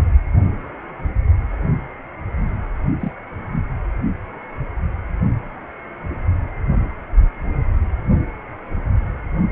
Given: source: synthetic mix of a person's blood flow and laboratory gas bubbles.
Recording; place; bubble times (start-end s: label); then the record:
Doppler ultrasound of blood flow; precordium
3.00-3.12 s: bubbles
From the record:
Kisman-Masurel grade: 111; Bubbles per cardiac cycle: 1 to 2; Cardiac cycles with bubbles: 1 to 10%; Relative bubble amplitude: barely perceptible (0.100 to 0.250); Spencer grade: 1 (occasional bubble signal discernible with the cardiac motion signal, with majority of cardiac periods free of bubbles); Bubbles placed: only in the low amplitude regions of the cardiac cycle